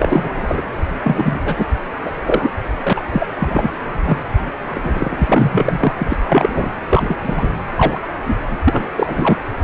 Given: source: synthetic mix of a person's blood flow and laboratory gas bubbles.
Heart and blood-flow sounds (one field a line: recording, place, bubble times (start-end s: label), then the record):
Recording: Doppler ultrasound of blood flow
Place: precordium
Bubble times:
0.00-0.61 s: bubbles
1.03-1.40 s: bubbles
1.46-1.66 s: bubbles
2.03-2.11 s: bubbles
2.25-2.50 s: bubbles
2.83-2.93 s: bubbles
2.96-3.01 s: bubbles
3.12-3.28 s: bubbles
3.39-3.69 s: bubbles
4.05-4.18 s: bubbles
4.74-5.92 s: bubbles
5.98-6.17 s: bubbles
6.25-6.70 s: bubbles
6.89-7.16 s: bubbles
7.23-7.50 s: bubbles
7.75-8.01 s: bubbles
8.25-8.37 s: bubbles
8.51-8.58 s: bubbles
8.65-8.91 s: bubbles
8.96-9.37 s: bubbles
From the record:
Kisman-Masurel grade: 243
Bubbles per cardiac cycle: several, 3 to 8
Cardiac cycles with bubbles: 100%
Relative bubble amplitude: loud (0.450 to 0.775)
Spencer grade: 3 (all of the cardiac periods contain showers or single bubble signals, but not dominating or overriding the cardiac motion signals)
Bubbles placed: anywhere in the cardiac cycle